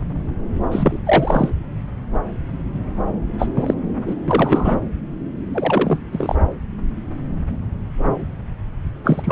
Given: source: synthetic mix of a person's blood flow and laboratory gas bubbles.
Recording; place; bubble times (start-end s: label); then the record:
Doppler ultrasound of blood flow; subclavian vein
0.71-0.98 s: bubbles
1.06-1.50 s: bubbles
3.38-3.48 s: bubbles
3.56-3.74 s: bubbles
4.07-4.15 s: bubbles
4.28-4.77 s: bubbles
5.52-6.00 s: bubbles
6.12-6.35 s: bubbles
9.04-9.31 s: bubbles
From the record:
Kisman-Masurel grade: 223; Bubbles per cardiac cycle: several, 3 to 8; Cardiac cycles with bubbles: 10 to 50%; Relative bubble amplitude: loud (0.450 to 0.775); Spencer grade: 2 (many but less than half of the cardiac periods contain bubble signals, singularly or in groups); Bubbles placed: anywhere in the cardiac cycle